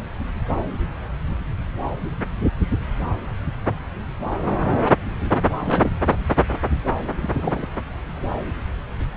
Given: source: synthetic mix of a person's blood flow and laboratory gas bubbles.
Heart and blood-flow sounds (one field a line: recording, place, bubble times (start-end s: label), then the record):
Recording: Doppler ultrasound of blood flow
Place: subclavian vein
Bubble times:
5.59-5.92 s: bubbles
7.21-7.67 s: bubbles
From the record:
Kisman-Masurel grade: 211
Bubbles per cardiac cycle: several, 3 to 8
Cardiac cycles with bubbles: 1 to 10%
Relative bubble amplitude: barely perceptible (0.100 to 0.250)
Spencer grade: 1 (occasional bubble signal discernible with the cardiac motion signal, with majority of cardiac periods free of bubbles)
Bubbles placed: anywhere in the cardiac cycle